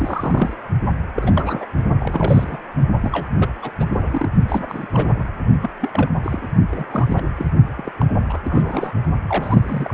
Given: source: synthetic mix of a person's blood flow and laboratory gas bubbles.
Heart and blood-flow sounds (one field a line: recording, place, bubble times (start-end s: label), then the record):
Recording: Doppler ultrasound of blood flow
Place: precordium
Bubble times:
0.00-0.54 s: bubbles
1.15-1.66 s: bubbles
2.00-2.58 s: bubbles
3.02-3.29 s: bubbles
3.38-3.51 s: bubbles
3.62-3.71 s: bubbles
3.79-3.88 s: bubbles
3.92-4.29 s: bubbles
4.48-4.65 s: bubbles
4.68-4.88 s: bubbles
4.93-5.23 s: bubbles
5.61-5.70 s: bubbles
5.80-5.89 s: bubbles
5.93-6.10 s: bubbles
6.23-6.47 s: bubbles
6.71-6.88 s: bubbles
6.91-7.21 s: bubbles
7.37-7.50 s: bubbles
7.77-7.91 s: bubbles
8.00-8.05 s: bubbles
8.29-8.39 s: bubbles
8.44-8.94 s: bubbles
9.29-9.94 s: bubbles
From the record:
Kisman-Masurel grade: 342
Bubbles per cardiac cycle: rolling drumbeat, 9 or more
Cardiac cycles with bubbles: 100%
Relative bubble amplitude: moderate (0.250 to 0.450)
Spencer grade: 3 (all of the cardiac periods contain showers or single bubble signals, but not dominating or overriding the cardiac motion signals)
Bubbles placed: only in the low amplitude regions of the cardiac cycle